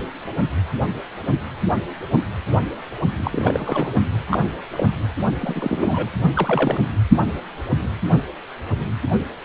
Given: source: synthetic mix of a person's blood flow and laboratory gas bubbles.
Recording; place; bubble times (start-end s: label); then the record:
Doppler ultrasound of blood flow; precordium
3.16-3.92 s: bubbles
4.30-4.42 s: bubbles
4.73-4.88 s: bubbles
5.40-6.10 s: bubbles
6.33-6.81 s: bubbles
From the record:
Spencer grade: 2 (many but less than half of the cardiac periods contain bubble signals, singularly or in groups); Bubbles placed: only in the low amplitude regions of the cardiac cycle